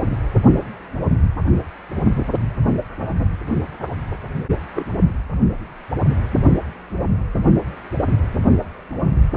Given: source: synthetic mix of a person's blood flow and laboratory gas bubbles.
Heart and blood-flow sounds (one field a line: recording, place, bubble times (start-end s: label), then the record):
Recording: Doppler ultrasound of blood flow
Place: precordium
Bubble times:
4.75-4.84 s: bubbles
From the record:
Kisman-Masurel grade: 112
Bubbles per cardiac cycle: 1 to 2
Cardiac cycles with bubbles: 1 to 10%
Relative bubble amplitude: moderate (0.250 to 0.450)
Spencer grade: 1 (occasional bubble signal discernible with the cardiac motion signal, with majority of cardiac periods free of bubbles)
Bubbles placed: only in the low amplitude regions of the cardiac cycle